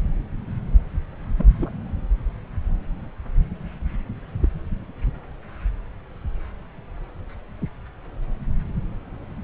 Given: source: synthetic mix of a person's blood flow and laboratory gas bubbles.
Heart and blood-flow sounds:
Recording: Doppler ultrasound of blood flow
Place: subclavian vein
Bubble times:
1.38-1.72 s: bubbles
4.42-4.48 s: bubbles
From the record:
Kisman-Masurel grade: 121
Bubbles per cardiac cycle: 1 to 2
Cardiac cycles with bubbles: 10 to 50%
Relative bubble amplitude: barely perceptible (0.100 to 0.250)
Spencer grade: 2 (many but less than half of the cardiac periods contain bubble signals, singularly or in groups)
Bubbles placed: anywhere in the cardiac cycle

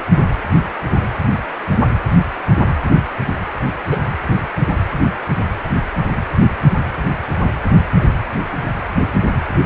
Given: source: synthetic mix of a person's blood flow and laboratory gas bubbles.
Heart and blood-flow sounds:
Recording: Doppler ultrasound of blood flow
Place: precordium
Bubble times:
3.91-3.97 s: bubbles
From the record:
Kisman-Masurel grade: 113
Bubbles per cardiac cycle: 1 to 2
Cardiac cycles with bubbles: 1 to 10%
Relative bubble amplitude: loud (0.450 to 0.775)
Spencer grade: 1 (occasional bubble signal discernible with the cardiac motion signal, with majority of cardiac periods free of bubbles)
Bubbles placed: anywhere in the cardiac cycle

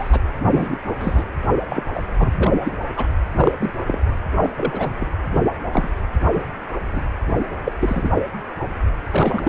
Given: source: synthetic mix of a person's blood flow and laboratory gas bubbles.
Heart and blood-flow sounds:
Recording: Doppler ultrasound of blood flow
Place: precordium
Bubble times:
0.00-0.20 s: bubbles
0.52-0.78 s: bubbles
1.00-1.24 s: bubbles
1.70-1.84 s: bubbles
1.93-2.04 s: bubbles
2.18-2.31 s: bubbles
2.33-2.51 s: bubbles
2.63-2.76 s: bubbles
2.96-3.06 s: bubbles
3.37-3.51 s: bubbles
3.60-3.71 s: bubbles
3.87-4.00 s: bubbles
4.42-4.50 s: bubbles
4.57-4.91 s: bubbles
5.00-5.08 s: bubbles
5.33-5.41 s: bubbles
5.73-5.89 s: bubbles
6.33-6.43 s: bubbles
6.92-7.02 s: bubbles
7.65-7.72 s: bubbles
7.80-8.09 s: bubbles
9.13-9.49 s: bubbles
From the record:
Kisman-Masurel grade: 242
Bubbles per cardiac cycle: several, 3 to 8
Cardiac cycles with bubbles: 100%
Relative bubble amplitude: moderate (0.250 to 0.450)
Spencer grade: 3 (all of the cardiac periods contain showers or single bubble signals, but not dominating or overriding the cardiac motion signals)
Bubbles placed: anywhere in the cardiac cycle

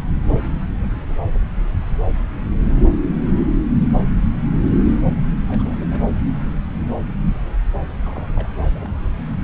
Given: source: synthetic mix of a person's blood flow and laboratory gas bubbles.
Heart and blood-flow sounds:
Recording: Doppler ultrasound of blood flow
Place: subclavian vein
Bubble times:
5.48-5.75 s: bubbles
5.80-5.87 s: bubbles
5.91-6.00 s: bubbles
8.03-8.27 s: bubbles
8.35-8.48 s: bubbles
8.75-8.91 s: bubbles
From the record:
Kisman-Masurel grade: 211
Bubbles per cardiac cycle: several, 3 to 8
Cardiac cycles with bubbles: 1 to 10%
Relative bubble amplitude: barely perceptible (0.100 to 0.250)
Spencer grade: 1 (occasional bubble signal discernible with the cardiac motion signal, with majority of cardiac periods free of bubbles)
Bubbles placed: anywhere in the cardiac cycle

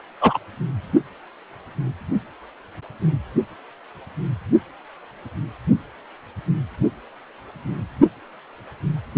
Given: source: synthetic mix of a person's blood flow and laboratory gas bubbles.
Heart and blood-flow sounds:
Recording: Doppler ultrasound of blood flow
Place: precordium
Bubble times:
0.21-0.39 s: bubbles
From the record:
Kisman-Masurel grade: 113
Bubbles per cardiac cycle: 1 to 2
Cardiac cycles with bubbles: 1 to 10%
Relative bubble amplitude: loud (0.450 to 0.775)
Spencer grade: 1 (occasional bubble signal discernible with the cardiac motion signal, with majority of cardiac periods free of bubbles)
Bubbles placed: only in the low amplitude regions of the cardiac cycle

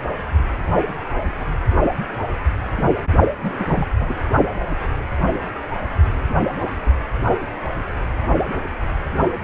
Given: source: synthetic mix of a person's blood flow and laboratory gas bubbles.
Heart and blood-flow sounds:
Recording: Doppler ultrasound of blood flow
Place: precordium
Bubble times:
3.38-3.87 s: bubbles
4.00-4.14 s: bubbles
From the record:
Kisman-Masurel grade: 211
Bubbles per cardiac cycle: several, 3 to 8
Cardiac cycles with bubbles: 1 to 10%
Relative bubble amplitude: barely perceptible (0.100 to 0.250)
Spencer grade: 1 (occasional bubble signal discernible with the cardiac motion signal, with majority of cardiac periods free of bubbles)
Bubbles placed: only in the low amplitude regions of the cardiac cycle

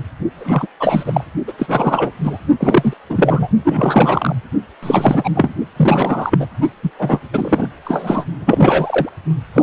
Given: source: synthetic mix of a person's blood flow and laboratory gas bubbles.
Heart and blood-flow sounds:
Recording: Doppler ultrasound of blood flow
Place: precordium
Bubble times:
0.39-0.67 s: bubbles
0.79-1.24 s: bubbles
1.47-1.52 s: bubbles
1.57-2.12 s: bubbles
2.24-2.38 s: bubbles
2.60-2.94 s: bubbles
3.09-3.48 s: bubbles
3.64-4.35 s: bubbles
4.82-5.30 s: bubbles
5.34-5.54 s: bubbles
5.76-6.46 s: bubbles
6.82-6.90 s: bubbles
6.98-7.21 s: bubbles
7.32-7.68 s: bubbles
7.84-8.24 s: bubbles
8.39-9.09 s: bubbles
9.54-9.62 s: bubbles
From the record:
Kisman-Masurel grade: 343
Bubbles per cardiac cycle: rolling drumbeat, 9 or more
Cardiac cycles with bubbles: 100%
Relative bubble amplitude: loud (0.450 to 0.775)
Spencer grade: 3 (all of the cardiac periods contain showers or single bubble signals, but not dominating or overriding the cardiac motion signals)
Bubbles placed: only in the low amplitude regions of the cardiac cycle

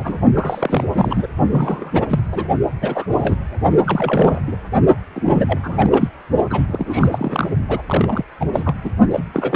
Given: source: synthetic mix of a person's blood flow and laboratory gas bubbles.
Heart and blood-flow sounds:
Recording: Doppler ultrasound of blood flow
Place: precordium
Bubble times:
0.00-0.20 s: bubbles
0.34-0.84 s: bubbles
0.87-1.27 s: bubbles
1.51-2.20 s: bubbles
2.32-2.48 s: bubbles
2.81-3.05 s: bubbles
3.10-3.36 s: bubbles
3.86-4.41 s: bubbles
4.47-4.56 s: bubbles
5.15-5.21 s: bubbles
5.25-5.59 s: bubbles
5.63-6.08 s: bubbles
6.50-6.61 s: bubbles
6.67-7.09 s: bubbles
7.12-7.47 s: bubbles
7.69-7.81 s: bubbles
7.87-8.24 s: bubbles
8.40-8.46 s: bubbles
8.53-8.75 s: bubbles
8.84-8.90 s: bubbles
9.11-9.24 s: bubbles
9.32-9.56 s: bubbles
From the record:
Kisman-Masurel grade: 332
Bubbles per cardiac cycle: rolling drumbeat, 9 or more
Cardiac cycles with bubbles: 50 to 99%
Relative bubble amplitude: moderate (0.250 to 0.450)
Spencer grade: 3 (all of the cardiac periods contain showers or single bubble signals, but not dominating or overriding the cardiac motion signals)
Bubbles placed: only in the low amplitude regions of the cardiac cycle

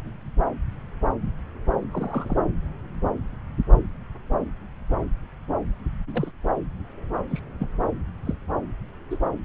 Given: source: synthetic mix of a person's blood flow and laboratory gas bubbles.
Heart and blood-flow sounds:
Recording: Doppler ultrasound of blood flow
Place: subclavian vein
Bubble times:
1.91-2.37 s: bubbles
6.13-6.31 s: bubbles
7.31-7.41 s: bubbles
7.59-7.69 s: bubbles
8.25-8.35 s: bubbles
9.10-9.17 s: bubbles
From the record:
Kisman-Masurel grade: 122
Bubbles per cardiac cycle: 1 to 2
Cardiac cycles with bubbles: 10 to 50%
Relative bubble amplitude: moderate (0.250 to 0.450)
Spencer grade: 2 (many but less than half of the cardiac periods contain bubble signals, singularly or in groups)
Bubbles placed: anywhere in the cardiac cycle

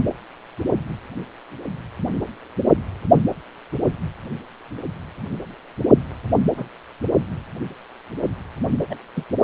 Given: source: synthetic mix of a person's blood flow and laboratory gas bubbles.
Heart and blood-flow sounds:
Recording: Doppler ultrasound of blood flow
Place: precordium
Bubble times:
6.57-6.66 s: bubbles
8.90-8.95 s: bubbles
9.15-9.23 s: bubbles
From the record:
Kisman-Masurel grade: 121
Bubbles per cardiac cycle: 1 to 2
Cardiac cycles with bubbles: 10 to 50%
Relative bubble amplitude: barely perceptible (0.100 to 0.250)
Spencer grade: 2 (many but less than half of the cardiac periods contain bubble signals, singularly or in groups)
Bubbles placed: only in the low amplitude regions of the cardiac cycle

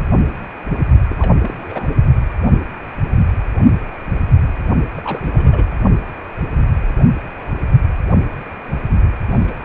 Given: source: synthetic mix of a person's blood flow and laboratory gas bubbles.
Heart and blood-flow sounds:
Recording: Doppler ultrasound of blood flow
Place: precordium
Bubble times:
1.09-1.31 s: bubbles
1.41-1.54 s: bubbles
1.59-1.90 s: bubbles
4.95-5.20 s: bubbles
5.23-5.66 s: bubbles
9.31-9.65 s: bubbles
From the record:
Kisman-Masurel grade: 221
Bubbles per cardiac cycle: several, 3 to 8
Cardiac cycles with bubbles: 10 to 50%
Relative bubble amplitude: barely perceptible (0.100 to 0.250)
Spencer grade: 2 (many but less than half of the cardiac periods contain bubble signals, singularly or in groups)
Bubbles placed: anywhere in the cardiac cycle

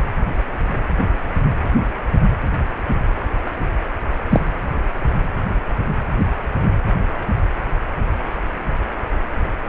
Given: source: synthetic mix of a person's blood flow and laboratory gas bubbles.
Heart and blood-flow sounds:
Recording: Doppler ultrasound of blood flow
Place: precordium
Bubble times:
4.29-4.41 s: bubbles
From the record:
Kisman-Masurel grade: 113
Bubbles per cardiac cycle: 1 to 2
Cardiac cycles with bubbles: 1 to 10%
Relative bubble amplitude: loud (0.450 to 0.775)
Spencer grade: 1 (occasional bubble signal discernible with the cardiac motion signal, with majority of cardiac periods free of bubbles)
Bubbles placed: anywhere in the cardiac cycle

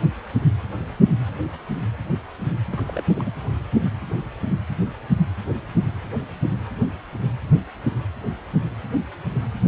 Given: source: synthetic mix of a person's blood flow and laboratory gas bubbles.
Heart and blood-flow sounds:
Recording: Doppler ultrasound of blood flow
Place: precordium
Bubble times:
2.73-3.04 s: bubbles
3.16-3.32 s: bubbles
From the record:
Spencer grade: 1 (occasional bubble signal discernible with the cardiac motion signal, with majority of cardiac periods free of bubbles)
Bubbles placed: anywhere in the cardiac cycle

